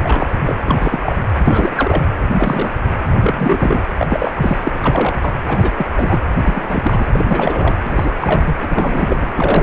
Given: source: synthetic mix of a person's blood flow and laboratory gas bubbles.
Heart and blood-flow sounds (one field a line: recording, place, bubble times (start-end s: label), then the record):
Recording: Doppler ultrasound of blood flow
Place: precordium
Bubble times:
0.00-0.28 s: bubbles
0.47-0.55 s: bubbles
0.66-1.16 s: bubbles
1.46-2.04 s: bubbles
2.31-2.71 s: bubbles
3.06-3.86 s: bubbles
3.99-4.31 s: bubbles
4.34-4.58 s: bubbles
4.63-4.70 s: bubbles
4.82-5.37 s: bubbles
5.47-5.86 s: bubbles
5.96-6.21 s: bubbles
6.42-7.07 s: bubbles
7.12-7.76 s: bubbles
7.83-8.56 s: bubbles
8.61-9.26 s: bubbles
9.36-9.63 s: bubbles
From the record:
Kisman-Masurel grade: 342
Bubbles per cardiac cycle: rolling drumbeat, 9 or more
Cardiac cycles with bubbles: 100%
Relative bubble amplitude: moderate (0.250 to 0.450)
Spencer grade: 3 (all of the cardiac periods contain showers or single bubble signals, but not dominating or overriding the cardiac motion signals)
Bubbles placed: anywhere in the cardiac cycle